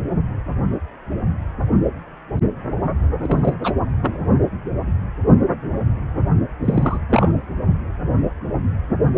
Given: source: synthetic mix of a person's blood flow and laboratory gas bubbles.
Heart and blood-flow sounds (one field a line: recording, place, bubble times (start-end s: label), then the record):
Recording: Doppler ultrasound of blood flow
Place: precordium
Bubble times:
3.21-3.54 s: bubbles
3.61-3.72 s: bubbles
4.00-4.20 s: bubbles
6.64-6.97 s: bubbles
7.09-7.55 s: bubbles
From the record:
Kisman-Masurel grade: 223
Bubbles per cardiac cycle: several, 3 to 8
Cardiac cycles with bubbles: 10 to 50%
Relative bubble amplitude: loud (0.450 to 0.775)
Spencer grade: 2 (many but less than half of the cardiac periods contain bubble signals, singularly or in groups)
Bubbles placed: only in the low amplitude regions of the cardiac cycle